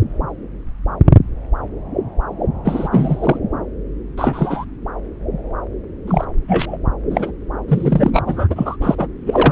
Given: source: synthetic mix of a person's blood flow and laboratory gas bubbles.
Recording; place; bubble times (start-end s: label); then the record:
Doppler ultrasound of blood flow; subclavian vein
2.64-2.88 s: bubbles
2.91-3.38 s: bubbles
4.17-4.65 s: bubbles
6.07-6.25 s: bubbles
6.48-6.77 s: bubbles
7.10-7.31 s: bubbles
7.68-8.10 s: bubbles
8.12-8.23 s: bubbles
8.26-8.47 s: bubbles
8.50-8.77 s: bubbles
8.80-8.95 s: bubbles
8.97-9.07 s: bubbles
9.26-9.52 s: bubbles
From the record:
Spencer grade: 3 (all of the cardiac periods contain showers or single bubble signals, but not dominating or overriding the cardiac motion signals); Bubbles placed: anywhere in the cardiac cycle